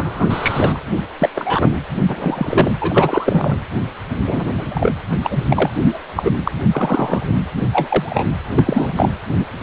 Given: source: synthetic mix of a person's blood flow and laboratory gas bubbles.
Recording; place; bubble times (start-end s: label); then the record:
Doppler ultrasound of blood flow; precordium
0.00-0.83 s: bubbles
1.21-1.29 s: bubbles
1.35-1.70 s: bubbles
2.07-2.71 s: bubbles
2.81-3.58 s: bubbles
4.27-4.48 s: bubbles
4.57-4.92 s: bubbles
5.24-5.45 s: bubbles
5.50-5.70 s: bubbles
5.79-5.99 s: bubbles
6.16-6.36 s: bubbles
6.44-6.52 s: bubbles
6.73-7.33 s: bubbles
7.73-8.27 s: bubbles
8.55-9.11 s: bubbles
9.38-9.46 s: bubbles
9.59-9.63 s: bubbles
From the record:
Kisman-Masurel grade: 243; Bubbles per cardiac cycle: several, 3 to 8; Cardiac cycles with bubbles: 100%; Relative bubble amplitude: loud (0.450 to 0.775); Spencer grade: 3 (all of the cardiac periods contain showers or single bubble signals, but not dominating or overriding the cardiac motion signals); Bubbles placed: anywhere in the cardiac cycle